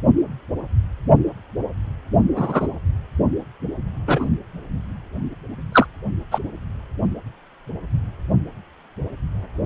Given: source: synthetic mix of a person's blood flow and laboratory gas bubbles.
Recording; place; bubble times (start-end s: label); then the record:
Doppler ultrasound of blood flow; precordium
2.35-2.68 s: bubbles
4.06-4.27 s: bubbles
5.72-5.86 s: bubbles
6.31-6.38 s: bubbles
From the record:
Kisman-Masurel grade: 123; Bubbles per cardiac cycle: 1 to 2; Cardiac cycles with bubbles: 10 to 50%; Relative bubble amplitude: loud (0.450 to 0.775); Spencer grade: 2 (many but less than half of the cardiac periods contain bubble signals, singularly or in groups); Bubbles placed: only in the low amplitude regions of the cardiac cycle